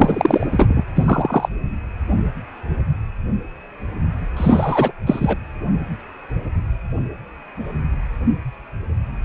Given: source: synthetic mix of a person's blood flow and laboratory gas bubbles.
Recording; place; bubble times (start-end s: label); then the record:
Doppler ultrasound of blood flow; precordium
0.00-0.47 s: bubbles
0.51-0.83 s: bubbles
0.95-1.49 s: bubbles
4.37-4.92 s: bubbles
5.06-5.38 s: bubbles
From the record:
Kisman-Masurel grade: 233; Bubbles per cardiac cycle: several, 3 to 8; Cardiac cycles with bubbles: 50 to 99%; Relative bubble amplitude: loud (0.450 to 0.775); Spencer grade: 3 (all of the cardiac periods contain showers or single bubble signals, but not dominating or overriding the cardiac motion signals); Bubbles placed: anywhere in the cardiac cycle